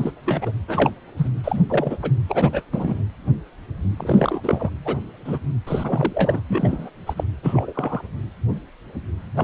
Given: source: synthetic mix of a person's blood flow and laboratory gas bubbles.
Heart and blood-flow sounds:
Doppler ultrasound of blood flow; precordium
0.00-0.11 s: bubbles
0.26-0.52 s: bubbles
0.68-0.92 s: bubbles
1.17-1.29 s: bubbles
1.44-1.60 s: bubbles
1.69-1.98 s: bubbles
2.02-2.11 s: bubbles
2.29-2.62 s: bubbles
2.72-3.04 s: bubbles
3.96-4.70 s: bubbles
4.84-4.97 s: bubbles
5.25-5.39 s: bubbles
5.67-6.41 s: bubbles
6.49-6.90 s: bubbles
7.07-7.14 s: bubbles
7.17-7.24 s: bubbles
7.43-7.73 s: bubbles
7.75-8.01 s: bubbles
9.36-9.44 s: bubbles
From the record:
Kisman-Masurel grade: 232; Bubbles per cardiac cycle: several, 3 to 8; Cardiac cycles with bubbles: 50 to 99%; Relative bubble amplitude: moderate (0.250 to 0.450); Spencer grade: 3 (all of the cardiac periods contain showers or single bubble signals, but not dominating or overriding the cardiac motion signals); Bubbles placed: anywhere in the cardiac cycle

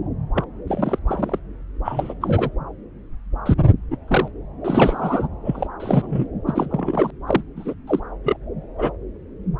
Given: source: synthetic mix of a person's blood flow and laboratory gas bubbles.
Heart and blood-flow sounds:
Doppler ultrasound of blood flow; subclavian vein
0.35-0.44 s: bubbles
0.67-0.99 s: bubbles
1.07-1.39 s: bubbles
1.85-2.14 s: bubbles
2.21-2.50 s: bubbles
3.46-3.54 s: bubbles
3.90-3.97 s: bubbles
4.07-4.28 s: bubbles
4.64-5.27 s: bubbles
5.44-5.67 s: bubbles
5.79-6.26 s: bubbles
6.46-7.10 s: bubbles
7.27-7.42 s: bubbles
7.56-7.74 s: bubbles
7.87-8.00 s: bubbles
8.23-8.37 s: bubbles
8.78-8.91 s: bubbles
From the record:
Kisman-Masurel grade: 232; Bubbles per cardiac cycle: several, 3 to 8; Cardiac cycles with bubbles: 50 to 99%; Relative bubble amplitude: moderate (0.250 to 0.450); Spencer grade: 3 (all of the cardiac periods contain showers or single bubble signals, but not dominating or overriding the cardiac motion signals); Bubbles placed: anywhere in the cardiac cycle

